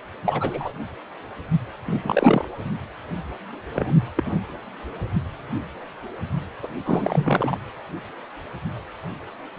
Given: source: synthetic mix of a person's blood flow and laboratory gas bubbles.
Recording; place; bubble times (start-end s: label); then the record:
Doppler ultrasound of blood flow; precordium
0.26-0.71 s: bubbles
1.85-2.46 s: bubbles
3.75-3.95 s: bubbles
4.17-4.38 s: bubbles
6.62-6.68 s: bubbles
6.85-7.58 s: bubbles
From the record:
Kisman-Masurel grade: 222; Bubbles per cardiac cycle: several, 3 to 8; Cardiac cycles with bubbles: 10 to 50%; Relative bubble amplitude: moderate (0.250 to 0.450); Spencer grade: 2 (many but less than half of the cardiac periods contain bubble signals, singularly or in groups); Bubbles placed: anywhere in the cardiac cycle